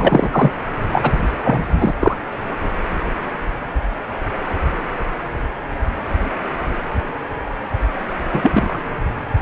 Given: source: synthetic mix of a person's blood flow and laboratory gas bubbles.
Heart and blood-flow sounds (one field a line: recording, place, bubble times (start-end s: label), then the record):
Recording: Doppler ultrasound of blood flow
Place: precordium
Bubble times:
0.00-0.51 s: bubbles
0.92-1.12 s: bubbles
1.44-1.59 s: bubbles
1.78-1.94 s: bubbles
2.00-2.15 s: bubbles
8.30-8.79 s: bubbles
From the record:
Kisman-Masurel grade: 223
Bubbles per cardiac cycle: several, 3 to 8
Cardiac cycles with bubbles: 10 to 50%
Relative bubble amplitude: loud (0.450 to 0.775)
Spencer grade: 2 (many but less than half of the cardiac periods contain bubble signals, singularly or in groups)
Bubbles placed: anywhere in the cardiac cycle